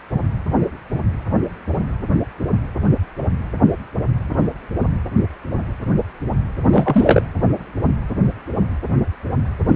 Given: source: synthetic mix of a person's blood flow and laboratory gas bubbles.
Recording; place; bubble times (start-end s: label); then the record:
Doppler ultrasound of blood flow; precordium
6.70-7.28 s: bubbles
From the record:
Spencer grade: 1 (occasional bubble signal discernible with the cardiac motion signal, with majority of cardiac periods free of bubbles); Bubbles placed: anywhere in the cardiac cycle